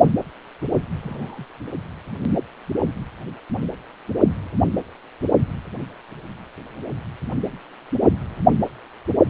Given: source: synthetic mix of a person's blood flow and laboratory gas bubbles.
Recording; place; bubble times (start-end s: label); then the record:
Doppler ultrasound of blood flow; precordium
0.96-1.45 s: bubbles
1.73-1.77 s: bubbles
From the record:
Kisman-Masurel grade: 111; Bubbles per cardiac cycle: 1 to 2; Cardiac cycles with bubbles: 1 to 10%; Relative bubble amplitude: barely perceptible (0.100 to 0.250); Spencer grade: 1 (occasional bubble signal discernible with the cardiac motion signal, with majority of cardiac periods free of bubbles); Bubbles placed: anywhere in the cardiac cycle